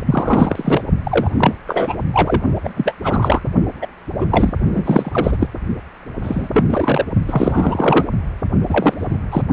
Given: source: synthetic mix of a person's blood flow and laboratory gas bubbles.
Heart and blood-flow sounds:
Doppler ultrasound of blood flow; precordium
0.00-0.83 s: bubbles
1.04-1.31 s: bubbles
1.37-1.54 s: bubbles
1.67-1.95 s: bubbles
2.13-2.42 s: bubbles
2.62-2.72 s: bubbles
2.76-2.95 s: bubbles
3.03-3.42 s: bubbles
3.81-3.87 s: bubbles
4.20-4.26 s: bubbles
4.30-4.53 s: bubbles
4.73-5.47 s: bubbles
6.22-6.48 s: bubbles
6.53-6.64 s: bubbles
6.67-7.04 s: bubbles
7.27-8.06 s: bubbles
8.69-9.18 s: bubbles
9.32-9.42 s: bubbles
From the record:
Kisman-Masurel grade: 243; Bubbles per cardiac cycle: several, 3 to 8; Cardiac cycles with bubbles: 100%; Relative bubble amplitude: loud (0.450 to 0.775); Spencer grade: 3 (all of the cardiac periods contain showers or single bubble signals, but not dominating or overriding the cardiac motion signals); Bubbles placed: only in the low amplitude regions of the cardiac cycle

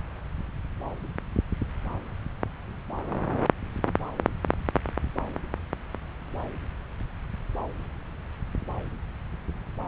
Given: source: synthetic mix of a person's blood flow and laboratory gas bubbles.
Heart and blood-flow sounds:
Doppler ultrasound of blood flow; subclavian vein
no bubbles
From the record:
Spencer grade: 0 (complete lack of bubble signals)

